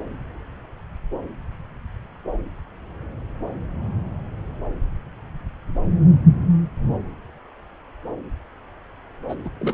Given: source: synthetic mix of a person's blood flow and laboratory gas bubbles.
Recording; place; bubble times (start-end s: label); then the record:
Doppler ultrasound of blood flow; subclavian vein
9.29-9.35 s: bubbles
9.45-9.50 s: bubbles
9.60-9.74 s: bubbles
From the record:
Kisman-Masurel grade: 212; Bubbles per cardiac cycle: several, 3 to 8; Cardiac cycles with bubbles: 1 to 10%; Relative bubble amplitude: moderate (0.250 to 0.450); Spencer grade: 1 (occasional bubble signal discernible with the cardiac motion signal, with majority of cardiac periods free of bubbles); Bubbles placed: anywhere in the cardiac cycle